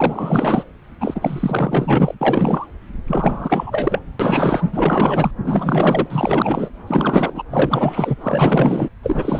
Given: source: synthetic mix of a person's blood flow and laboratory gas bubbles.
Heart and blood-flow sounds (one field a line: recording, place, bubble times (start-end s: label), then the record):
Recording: Doppler ultrasound of blood flow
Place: subclavian vein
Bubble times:
0.00-0.64 s: bubbles
1.01-2.15 s: bubbles
2.21-2.67 s: bubbles
3.08-3.99 s: bubbles
4.19-4.69 s: bubbles
4.72-5.31 s: bubbles
5.44-6.07 s: bubbles
6.10-6.71 s: bubbles
6.86-7.43 s: bubbles
7.50-8.17 s: bubbles
8.21-8.89 s: bubbles
9.03-9.39 s: bubbles
From the record:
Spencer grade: 4 (maximum detectable bubble signal sounding continuously throughout systole and diastole of every cardiac period, and overriding the amplitude of the normal cardiac signals)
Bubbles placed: anywhere in the cardiac cycle